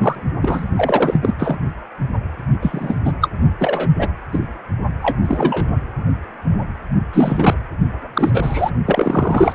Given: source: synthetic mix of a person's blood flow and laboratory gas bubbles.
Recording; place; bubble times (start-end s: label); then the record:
Doppler ultrasound of blood flow; precordium
0.00-0.22 s: bubbles
0.41-0.64 s: bubbles
0.75-1.18 s: bubbles
1.22-1.33 s: bubbles
1.38-1.58 s: bubbles
2.61-2.95 s: bubbles
3.04-3.12 s: bubbles
3.21-3.29 s: bubbles
3.59-3.89 s: bubbles
3.99-4.08 s: bubbles
4.32-4.39 s: bubbles
5.02-5.17 s: bubbles
5.24-5.67 s: bubbles
7.13-7.55 s: bubbles
8.13-8.71 s: bubbles
8.86-9.54 s: bubbles
From the record:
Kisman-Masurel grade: 233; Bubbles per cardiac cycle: several, 3 to 8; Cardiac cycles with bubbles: 50 to 99%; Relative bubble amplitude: loud (0.450 to 0.775); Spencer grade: 3 (all of the cardiac periods contain showers or single bubble signals, but not dominating or overriding the cardiac motion signals); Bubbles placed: only in the low amplitude regions of the cardiac cycle